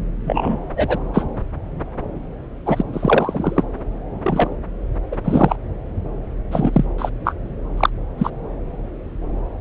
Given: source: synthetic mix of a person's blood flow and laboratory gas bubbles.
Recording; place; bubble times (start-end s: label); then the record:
Doppler ultrasound of blood flow; subclavian vein
0.24-0.57 s: bubbles
0.76-0.99 s: bubbles
1.14-1.24 s: bubbles
2.66-2.82 s: bubbles
2.93-3.64 s: bubbles
4.23-4.50 s: bubbles
5.11-5.17 s: bubbles
5.24-5.56 s: bubbles
6.51-6.84 s: bubbles
6.98-7.09 s: bubbles
7.25-7.34 s: bubbles
7.77-7.89 s: bubbles
8.17-8.30 s: bubbles
From the record:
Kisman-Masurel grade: 233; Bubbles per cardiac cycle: several, 3 to 8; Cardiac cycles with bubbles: 50 to 99%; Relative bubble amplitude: loud (0.450 to 0.775); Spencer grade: 3 (all of the cardiac periods contain showers or single bubble signals, but not dominating or overriding the cardiac motion signals); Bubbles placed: anywhere in the cardiac cycle